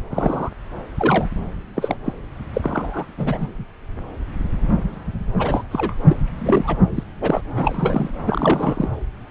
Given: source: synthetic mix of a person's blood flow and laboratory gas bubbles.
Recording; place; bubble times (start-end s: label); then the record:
Doppler ultrasound of blood flow; subclavian vein
0.10-0.49 s: bubbles
0.97-1.29 s: bubbles
1.75-1.98 s: bubbles
2.04-2.13 s: bubbles
2.53-3.05 s: bubbles
3.17-3.51 s: bubbles
5.38-5.63 s: bubbles
5.71-5.95 s: bubbles
6.08-6.16 s: bubbles
6.38-6.77 s: bubbles
6.95-7.04 s: bubbles
7.21-7.41 s: bubbles
7.56-8.10 s: bubbles
8.25-8.89 s: bubbles
From the record:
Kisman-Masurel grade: 232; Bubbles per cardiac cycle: several, 3 to 8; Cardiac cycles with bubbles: 50 to 99%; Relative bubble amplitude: moderate (0.250 to 0.450); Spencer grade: 3 (all of the cardiac periods contain showers or single bubble signals, but not dominating or overriding the cardiac motion signals); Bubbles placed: anywhere in the cardiac cycle